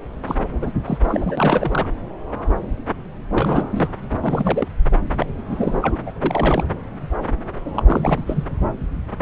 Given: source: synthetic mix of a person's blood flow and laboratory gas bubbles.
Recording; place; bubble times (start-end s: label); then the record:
Doppler ultrasound of blood flow; subclavian vein
0.26-0.35 s: bubbles
0.61-0.71 s: bubbles
0.85-0.98 s: bubbles
1.08-1.88 s: bubbles
3.32-3.88 s: bubbles
4.22-4.68 s: bubbles
5.20-5.26 s: bubbles
5.38-6.00 s: bubbles
6.06-6.12 s: bubbles
6.23-6.63 s: bubbles
7.74-7.83 s: bubbles
7.87-8.45 s: bubbles
From the record:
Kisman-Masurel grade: 332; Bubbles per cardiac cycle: rolling drumbeat, 9 or more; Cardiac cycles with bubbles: 50 to 99%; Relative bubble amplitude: moderate (0.250 to 0.450); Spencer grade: 3 (all of the cardiac periods contain showers or single bubble signals, but not dominating or overriding the cardiac motion signals); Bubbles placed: anywhere in the cardiac cycle